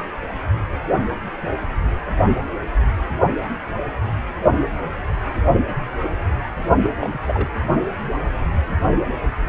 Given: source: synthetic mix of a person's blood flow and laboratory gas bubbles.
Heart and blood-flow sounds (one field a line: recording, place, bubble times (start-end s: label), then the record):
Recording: Doppler ultrasound of blood flow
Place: precordium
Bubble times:
6.80-6.90 s: bubbles
7.00-7.19 s: bubbles
7.28-7.48 s: bubbles
From the record:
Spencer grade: 1 (occasional bubble signal discernible with the cardiac motion signal, with majority of cardiac periods free of bubbles)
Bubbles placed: only in the low amplitude regions of the cardiac cycle